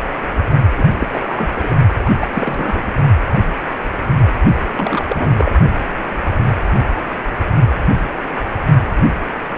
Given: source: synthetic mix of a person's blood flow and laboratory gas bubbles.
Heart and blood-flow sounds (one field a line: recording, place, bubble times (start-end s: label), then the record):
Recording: Doppler ultrasound of blood flow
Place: precordium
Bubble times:
0.77-0.84 s: bubbles
0.99-1.07 s: bubbles
1.11-1.51 s: bubbles
1.54-1.75 s: bubbles
2.04-2.11 s: bubbles
2.19-2.27 s: bubbles
2.33-2.83 s: bubbles
4.71-5.03 s: bubbles
5.08-5.52 s: bubbles
From the record:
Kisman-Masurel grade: 222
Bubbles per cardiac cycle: several, 3 to 8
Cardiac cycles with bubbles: 10 to 50%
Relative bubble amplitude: moderate (0.250 to 0.450)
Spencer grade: 2 (many but less than half of the cardiac periods contain bubble signals, singularly or in groups)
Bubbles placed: only in the low amplitude regions of the cardiac cycle